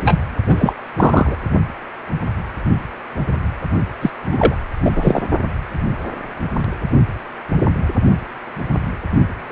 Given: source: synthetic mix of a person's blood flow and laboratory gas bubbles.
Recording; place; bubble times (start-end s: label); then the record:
Doppler ultrasound of blood flow; precordium
0.00-0.19 s: bubbles
0.46-0.73 s: bubbles
0.96-1.38 s: bubbles
4.01-4.10 s: bubbles
4.31-4.55 s: bubbles
4.83-5.23 s: bubbles
9.49-9.52 s: bubbles
From the record:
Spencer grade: 2 (many but less than half of the cardiac periods contain bubble signals, singularly or in groups); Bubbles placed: only in the low amplitude regions of the cardiac cycle